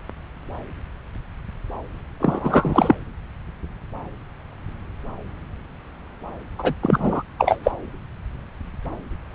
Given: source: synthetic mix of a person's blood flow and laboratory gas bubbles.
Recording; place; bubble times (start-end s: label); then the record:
Doppler ultrasound of blood flow; subclavian vein
2.20-2.95 s: bubbles
6.58-6.74 s: bubbles
6.82-7.23 s: bubbles
7.38-7.57 s: bubbles
7.63-7.71 s: bubbles
From the record:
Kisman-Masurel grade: 223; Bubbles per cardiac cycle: several, 3 to 8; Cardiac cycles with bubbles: 10 to 50%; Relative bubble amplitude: loud (0.450 to 0.775); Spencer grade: 2 (many but less than half of the cardiac periods contain bubble signals, singularly or in groups); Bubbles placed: anywhere in the cardiac cycle